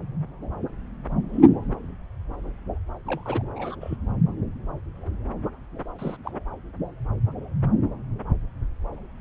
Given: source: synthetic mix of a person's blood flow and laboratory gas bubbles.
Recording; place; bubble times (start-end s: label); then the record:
Doppler ultrasound of blood flow; subclavian vein
1.33-1.59 s: bubbles
3.06-3.42 s: bubbles
3.55-3.76 s: bubbles
3.81-3.97 s: bubbles
5.99-6.17 s: bubbles
6.25-6.31 s: bubbles
From the record:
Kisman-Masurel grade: 121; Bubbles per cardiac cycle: 1 to 2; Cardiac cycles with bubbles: 10 to 50%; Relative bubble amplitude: barely perceptible (0.100 to 0.250); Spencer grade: 2 (many but less than half of the cardiac periods contain bubble signals, singularly or in groups); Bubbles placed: anywhere in the cardiac cycle